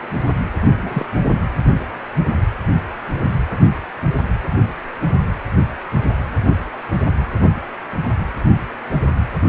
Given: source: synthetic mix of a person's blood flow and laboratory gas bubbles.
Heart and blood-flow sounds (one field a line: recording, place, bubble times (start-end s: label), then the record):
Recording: Doppler ultrasound of blood flow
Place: precordium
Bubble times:
0.82-1.05 s: bubbles
From the record:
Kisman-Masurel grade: 112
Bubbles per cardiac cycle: 1 to 2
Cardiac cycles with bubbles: 1 to 10%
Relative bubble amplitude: moderate (0.250 to 0.450)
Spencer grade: 1 (occasional bubble signal discernible with the cardiac motion signal, with majority of cardiac periods free of bubbles)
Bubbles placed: only in the low amplitude regions of the cardiac cycle